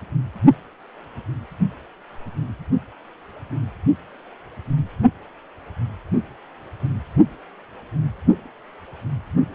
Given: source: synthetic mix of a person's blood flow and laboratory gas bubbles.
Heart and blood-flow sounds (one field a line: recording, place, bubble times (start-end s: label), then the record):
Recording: Doppler ultrasound of blood flow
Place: precordium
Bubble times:
no bubbles
From the record:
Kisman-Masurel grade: 000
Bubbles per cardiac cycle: 0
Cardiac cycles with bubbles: 0%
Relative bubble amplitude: no bubbles discernible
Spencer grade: 0 (complete lack of bubble signals)